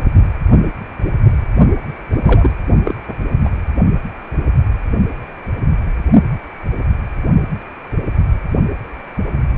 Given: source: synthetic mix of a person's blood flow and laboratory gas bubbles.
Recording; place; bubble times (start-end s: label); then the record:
Doppler ultrasound of blood flow; precordium
2.12-2.17 s: bubbles
2.21-2.51 s: bubbles
2.83-2.95 s: bubbles
3.08-3.14 s: bubbles
3.45-3.50 s: bubbles
From the record:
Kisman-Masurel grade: 223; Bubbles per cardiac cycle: several, 3 to 8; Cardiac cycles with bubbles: 10 to 50%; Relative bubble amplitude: loud (0.450 to 0.775); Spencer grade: 2 (many but less than half of the cardiac periods contain bubble signals, singularly or in groups); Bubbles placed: only in the low amplitude regions of the cardiac cycle